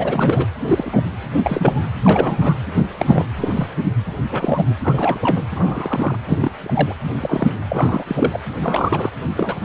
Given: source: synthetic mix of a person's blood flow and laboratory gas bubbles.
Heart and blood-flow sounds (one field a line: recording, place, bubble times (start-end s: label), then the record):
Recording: Doppler ultrasound of blood flow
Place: precordium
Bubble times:
0.00-0.46 s: bubbles
0.60-1.02 s: bubbles
1.37-1.83 s: bubbles
2.04-2.59 s: bubbles
2.76-2.82 s: bubbles
2.98-3.27 s: bubbles
3.36-3.68 s: bubbles
4.31-4.64 s: bubbles
4.81-5.18 s: bubbles
5.21-5.46 s: bubbles
5.50-6.17 s: bubbles
6.26-6.51 s: bubbles
6.62-6.95 s: bubbles
7.10-7.54 s: bubbles
7.70-8.04 s: bubbles
8.07-8.40 s: bubbles
8.62-9.10 s: bubbles
9.36-9.55 s: bubbles
From the record:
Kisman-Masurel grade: 242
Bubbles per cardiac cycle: several, 3 to 8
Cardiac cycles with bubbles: 100%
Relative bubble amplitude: moderate (0.250 to 0.450)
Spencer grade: 3 (all of the cardiac periods contain showers or single bubble signals, but not dominating or overriding the cardiac motion signals)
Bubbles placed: anywhere in the cardiac cycle